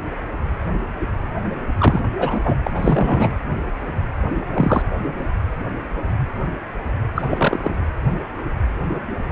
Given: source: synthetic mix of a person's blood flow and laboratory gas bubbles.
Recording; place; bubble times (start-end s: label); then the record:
Doppler ultrasound of blood flow; precordium
1.77-2.07 s: bubbles
2.18-2.40 s: bubbles
2.43-2.59 s: bubbles
2.63-2.71 s: bubbles
2.74-3.33 s: bubbles
4.54-4.82 s: bubbles
7.15-7.76 s: bubbles
From the record:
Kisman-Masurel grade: 223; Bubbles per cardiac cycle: several, 3 to 8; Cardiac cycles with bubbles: 10 to 50%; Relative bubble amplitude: loud (0.450 to 0.775); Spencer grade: 2 (many but less than half of the cardiac periods contain bubble signals, singularly or in groups); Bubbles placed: anywhere in the cardiac cycle